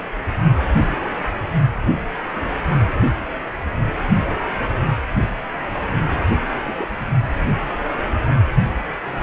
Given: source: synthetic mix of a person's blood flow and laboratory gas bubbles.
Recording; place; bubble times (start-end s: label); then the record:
Doppler ultrasound of blood flow; precordium
6.65-6.87 s: bubbles
From the record:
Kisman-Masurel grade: 111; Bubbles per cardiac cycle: 1 to 2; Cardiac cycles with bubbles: 1 to 10%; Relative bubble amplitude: barely perceptible (0.100 to 0.250); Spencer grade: 1 (occasional bubble signal discernible with the cardiac motion signal, with majority of cardiac periods free of bubbles); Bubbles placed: only in the low amplitude regions of the cardiac cycle